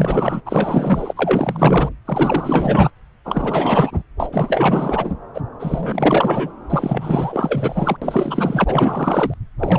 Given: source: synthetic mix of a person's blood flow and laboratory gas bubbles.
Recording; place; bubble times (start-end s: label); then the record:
Doppler ultrasound of blood flow; subclavian vein
0.00-0.41 s: bubbles
0.46-1.14 s: bubbles
1.16-1.89 s: bubbles
2.06-2.91 s: bubbles
3.25-4.03 s: bubbles
4.20-4.29 s: bubbles
4.32-5.16 s: bubbles
5.34-5.41 s: bubbles
5.60-6.50 s: bubbles
6.70-7.96 s: bubbles
8.02-9.34 s: bubbles
9.59-9.79 s: bubbles
From the record:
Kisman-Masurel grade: 444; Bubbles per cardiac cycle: continuous sound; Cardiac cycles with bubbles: 100%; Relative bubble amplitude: maximal (0.775 to 0.999); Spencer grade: 4 (maximum detectable bubble signal sounding continuously throughout systole and diastole of every cardiac period, and overriding the amplitude of the normal cardiac signals); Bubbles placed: anywhere in the cardiac cycle